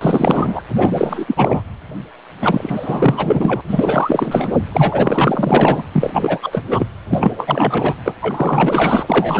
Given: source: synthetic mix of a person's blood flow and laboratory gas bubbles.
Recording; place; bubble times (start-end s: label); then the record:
Doppler ultrasound of blood flow; precordium
0.01-0.61 s: bubbles
0.75-1.62 s: bubbles
2.41-3.61 s: bubbles
3.67-4.58 s: bubbles
4.72-5.83 s: bubbles
5.92-6.39 s: bubbles
6.42-6.63 s: bubbles
6.70-6.87 s: bubbles
7.10-7.94 s: bubbles
8.04-8.13 s: bubbles
8.21-9.40 s: bubbles
From the record:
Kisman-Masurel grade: 444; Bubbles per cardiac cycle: continuous sound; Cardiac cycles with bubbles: 100%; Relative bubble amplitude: maximal (0.775 to 0.999); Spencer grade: 4 (maximum detectable bubble signal sounding continuously throughout systole and diastole of every cardiac period, and overriding the amplitude of the normal cardiac signals); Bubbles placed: anywhere in the cardiac cycle